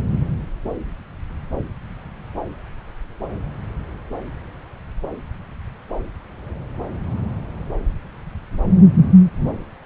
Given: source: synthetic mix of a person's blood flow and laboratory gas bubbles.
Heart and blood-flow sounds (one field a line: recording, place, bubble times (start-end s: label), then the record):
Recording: Doppler ultrasound of blood flow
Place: subclavian vein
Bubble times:
no bubbles
From the record:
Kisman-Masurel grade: 000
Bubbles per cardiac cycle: 0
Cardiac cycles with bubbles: 0%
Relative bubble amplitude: no bubbles discernible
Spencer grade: 0 (complete lack of bubble signals)